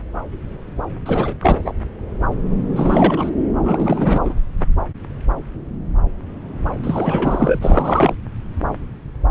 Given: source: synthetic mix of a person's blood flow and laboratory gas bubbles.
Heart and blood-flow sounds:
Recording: Doppler ultrasound of blood flow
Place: subclavian vein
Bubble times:
1.05-1.34 s: bubbles
1.41-1.73 s: bubbles
2.75-3.30 s: bubbles
3.60-4.35 s: bubbles
6.83-8.15 s: bubbles
From the record:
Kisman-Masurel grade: 333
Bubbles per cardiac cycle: rolling drumbeat, 9 or more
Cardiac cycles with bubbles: 50 to 99%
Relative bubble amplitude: loud (0.450 to 0.775)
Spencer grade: 3 (all of the cardiac periods contain showers or single bubble signals, but not dominating or overriding the cardiac motion signals)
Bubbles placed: anywhere in the cardiac cycle

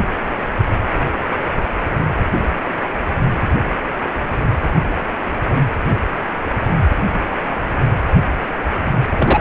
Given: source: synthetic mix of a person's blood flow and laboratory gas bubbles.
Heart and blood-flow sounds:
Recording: Doppler ultrasound of blood flow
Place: precordium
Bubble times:
9.19-9.41 s: bubbles
From the record:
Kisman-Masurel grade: 213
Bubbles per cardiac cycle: several, 3 to 8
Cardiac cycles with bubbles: 1 to 10%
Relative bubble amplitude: loud (0.450 to 0.775)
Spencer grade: 1 (occasional bubble signal discernible with the cardiac motion signal, with majority of cardiac periods free of bubbles)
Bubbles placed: anywhere in the cardiac cycle

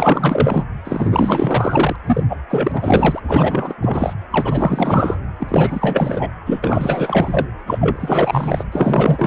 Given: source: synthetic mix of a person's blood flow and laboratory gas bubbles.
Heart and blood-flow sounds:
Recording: Doppler ultrasound of blood flow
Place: precordium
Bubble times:
0.00-0.63 s: bubbles
0.84-1.96 s: bubbles
2.06-2.23 s: bubbles
2.29-2.38 s: bubbles
2.50-3.20 s: bubbles
3.27-3.74 s: bubbles
3.81-4.13 s: bubbles
4.31-5.17 s: bubbles
5.39-6.30 s: bubbles
6.46-7.46 s: bubbles
7.67-8.64 s: bubbles
8.72-9.27 s: bubbles
From the record:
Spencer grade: 4 (maximum detectable bubble signal sounding continuously throughout systole and diastole of every cardiac period, and overriding the amplitude of the normal cardiac signals)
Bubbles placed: anywhere in the cardiac cycle

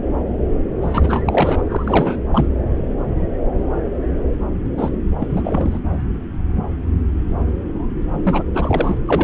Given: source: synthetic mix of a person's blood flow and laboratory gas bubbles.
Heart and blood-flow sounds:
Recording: Doppler ultrasound of blood flow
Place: subclavian vein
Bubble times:
0.82-1.23 s: bubbles
1.25-1.62 s: bubbles
1.69-2.17 s: bubbles
2.32-2.49 s: bubbles
4.77-4.91 s: bubbles
5.20-5.79 s: bubbles
8.24-8.43 s: bubbles
8.54-8.96 s: bubbles
9.07-9.24 s: bubbles
From the record:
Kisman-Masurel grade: 332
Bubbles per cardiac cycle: rolling drumbeat, 9 or more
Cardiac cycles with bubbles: 50 to 99%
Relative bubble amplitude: moderate (0.250 to 0.450)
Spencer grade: 3 (all of the cardiac periods contain showers or single bubble signals, but not dominating or overriding the cardiac motion signals)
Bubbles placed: anywhere in the cardiac cycle

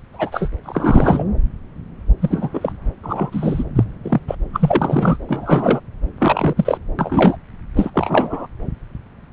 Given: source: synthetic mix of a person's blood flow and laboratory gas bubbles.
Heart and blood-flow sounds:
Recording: Doppler ultrasound of blood flow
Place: subclavian vein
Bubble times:
0.13-0.48 s: bubbles
0.64-1.25 s: bubbles
2.21-2.50 s: bubbles
2.54-2.73 s: bubbles
3.03-3.64 s: bubbles
3.75-3.84 s: bubbles
4.03-4.20 s: bubbles
4.28-4.35 s: bubbles
4.53-5.17 s: bubbles
5.28-5.80 s: bubbles
6.19-6.54 s: bubbles
6.57-6.78 s: bubbles
6.99-7.37 s: bubbles
7.76-7.91 s: bubbles
7.94-8.46 s: bubbles
From the record:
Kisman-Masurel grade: 233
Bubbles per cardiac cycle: several, 3 to 8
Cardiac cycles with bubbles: 50 to 99%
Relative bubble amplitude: loud (0.450 to 0.775)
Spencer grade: 3 (all of the cardiac periods contain showers or single bubble signals, but not dominating or overriding the cardiac motion signals)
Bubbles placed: anywhere in the cardiac cycle

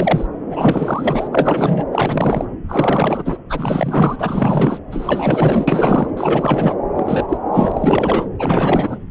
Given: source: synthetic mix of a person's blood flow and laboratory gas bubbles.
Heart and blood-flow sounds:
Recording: Doppler ultrasound of blood flow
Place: subclavian vein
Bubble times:
0.00-0.27 s: bubbles
0.50-1.28 s: bubbles
1.32-1.86 s: bubbles
1.92-2.45 s: bubbles
2.69-3.38 s: bubbles
3.49-4.16 s: bubbles
4.18-4.79 s: bubbles
4.91-6.10 s: bubbles
6.17-6.75 s: bubbles
6.96-7.37 s: bubbles
7.52-8.28 s: bubbles
8.38-8.98 s: bubbles
From the record:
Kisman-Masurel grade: 444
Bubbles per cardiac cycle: continuous sound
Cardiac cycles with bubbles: 100%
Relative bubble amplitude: maximal (0.775 to 0.999)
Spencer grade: 4 (maximum detectable bubble signal sounding continuously throughout systole and diastole of every cardiac period, and overriding the amplitude of the normal cardiac signals)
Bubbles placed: anywhere in the cardiac cycle

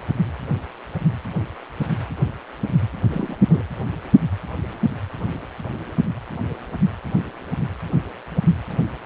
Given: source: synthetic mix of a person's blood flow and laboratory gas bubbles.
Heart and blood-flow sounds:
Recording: Doppler ultrasound of blood flow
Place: precordium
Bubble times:
3.11-3.36 s: bubbles
3.50-3.63 s: bubbles
From the record:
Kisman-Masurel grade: 112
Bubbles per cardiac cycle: 1 to 2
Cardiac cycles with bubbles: 1 to 10%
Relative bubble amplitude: moderate (0.250 to 0.450)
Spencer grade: 1 (occasional bubble signal discernible with the cardiac motion signal, with majority of cardiac periods free of bubbles)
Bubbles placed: anywhere in the cardiac cycle

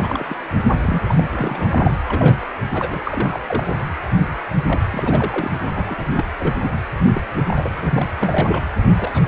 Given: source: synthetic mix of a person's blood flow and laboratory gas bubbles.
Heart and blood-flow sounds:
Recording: Doppler ultrasound of blood flow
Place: precordium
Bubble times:
0.00-0.26 s: bubbles
0.29-0.36 s: bubbles
0.58-0.64 s: bubbles
0.81-1.24 s: bubbles
1.31-1.92 s: bubbles
2.07-2.46 s: bubbles
2.74-3.00 s: bubbles
3.05-3.40 s: bubbles
3.46-3.75 s: bubbles
4.66-4.81 s: bubbles
4.91-5.50 s: bubbles
5.75-6.04 s: bubbles
6.15-6.25 s: bubbles
6.39-6.54 s: bubbles
6.62-6.69 s: bubbles
7.13-7.22 s: bubbles
7.37-8.06 s: bubbles
8.21-8.67 s: bubbles
8.98-9.28 s: bubbles
From the record:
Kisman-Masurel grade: 342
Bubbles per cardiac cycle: rolling drumbeat, 9 or more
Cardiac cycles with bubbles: 100%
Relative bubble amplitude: moderate (0.250 to 0.450)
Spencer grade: 3 (all of the cardiac periods contain showers or single bubble signals, but not dominating or overriding the cardiac motion signals)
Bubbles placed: anywhere in the cardiac cycle

